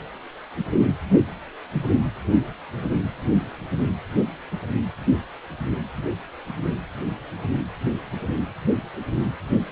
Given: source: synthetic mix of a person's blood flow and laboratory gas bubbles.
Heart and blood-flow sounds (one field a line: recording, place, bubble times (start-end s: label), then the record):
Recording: Doppler ultrasound of blood flow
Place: precordium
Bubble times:
no bubbles
From the record:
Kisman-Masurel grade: 000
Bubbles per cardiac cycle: 0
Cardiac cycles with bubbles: 0%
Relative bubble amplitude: no bubbles discernible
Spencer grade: 0 (complete lack of bubble signals)